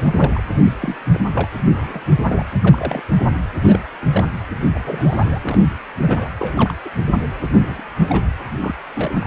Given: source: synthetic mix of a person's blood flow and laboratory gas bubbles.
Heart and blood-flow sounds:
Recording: Doppler ultrasound of blood flow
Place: precordium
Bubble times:
0.00-0.43 s: bubbles
0.58-0.75 s: bubbles
0.80-0.97 s: bubbles
1.13-1.19 s: bubbles
1.33-1.50 s: bubbles
1.71-2.02 s: bubbles
2.27-2.46 s: bubbles
2.61-3.02 s: bubbles
3.64-3.81 s: bubbles
4.01-4.06 s: bubbles
4.11-4.25 s: bubbles
4.75-4.80 s: bubbles
4.84-5.38 s: bubbles
5.42-5.62 s: bubbles
6.01-6.29 s: bubbles
6.38-6.74 s: bubbles
6.84-6.90 s: bubbles
6.98-7.11 s: bubbles
7.51-7.82 s: bubbles
8.09-8.25 s: bubbles
8.61-8.75 s: bubbles
8.95-9.27 s: bubbles
From the record:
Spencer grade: 3 (all of the cardiac periods contain showers or single bubble signals, but not dominating or overriding the cardiac motion signals)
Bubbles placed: anywhere in the cardiac cycle

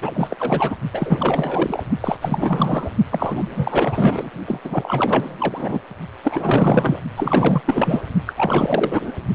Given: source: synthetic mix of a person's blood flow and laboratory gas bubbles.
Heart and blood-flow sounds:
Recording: Doppler ultrasound of blood flow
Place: precordium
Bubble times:
0.02-0.76 s: bubbles
0.92-1.83 s: bubbles
2.00-2.17 s: bubbles
2.21-2.90 s: bubbles
3.11-4.30 s: bubbles
4.45-4.60 s: bubbles
4.64-5.82 s: bubbles
6.23-7.02 s: bubbles
7.17-7.61 s: bubbles
7.65-8.02 s: bubbles
8.26-9.12 s: bubbles
From the record:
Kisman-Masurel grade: 444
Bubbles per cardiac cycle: continuous sound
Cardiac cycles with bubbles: 100%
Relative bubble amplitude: maximal (0.775 to 0.999)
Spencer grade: 4 (maximum detectable bubble signal sounding continuously throughout systole and diastole of every cardiac period, and overriding the amplitude of the normal cardiac signals)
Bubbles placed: only in the low amplitude regions of the cardiac cycle

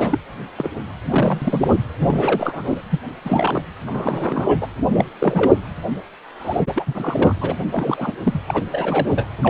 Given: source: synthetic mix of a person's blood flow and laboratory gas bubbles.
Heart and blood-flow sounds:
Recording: Doppler ultrasound of blood flow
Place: precordium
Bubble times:
0.00-0.19 s: bubbles
0.56-0.71 s: bubbles
1.09-1.79 s: bubbles
1.98-2.81 s: bubbles
2.91-2.99 s: bubbles
3.25-3.62 s: bubbles
3.86-4.67 s: bubbles
4.91-5.05 s: bubbles
5.20-5.53 s: bubbles
6.39-6.61 s: bubbles
6.75-7.36 s: bubbles
7.41-8.13 s: bubbles
8.23-8.40 s: bubbles
8.47-8.63 s: bubbles
8.71-9.28 s: bubbles
9.43-9.50 s: bubbles
From the record:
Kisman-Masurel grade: 342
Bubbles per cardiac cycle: rolling drumbeat, 9 or more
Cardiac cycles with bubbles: 100%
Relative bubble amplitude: moderate (0.250 to 0.450)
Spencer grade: 3 (all of the cardiac periods contain showers or single bubble signals, but not dominating or overriding the cardiac motion signals)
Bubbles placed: anywhere in the cardiac cycle

